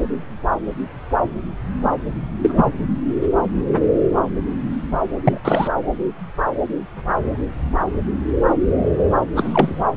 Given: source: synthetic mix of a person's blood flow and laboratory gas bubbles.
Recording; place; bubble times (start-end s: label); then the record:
Doppler ultrasound of blood flow; subclavian vein
2.42-2.81 s: bubbles
5.24-5.40 s: bubbles
5.45-5.68 s: bubbles
9.35-9.86 s: bubbles
From the record:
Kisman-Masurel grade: 223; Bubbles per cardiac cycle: several, 3 to 8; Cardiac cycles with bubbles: 10 to 50%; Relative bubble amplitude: loud (0.450 to 0.775); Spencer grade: 2 (many but less than half of the cardiac periods contain bubble signals, singularly or in groups); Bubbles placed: anywhere in the cardiac cycle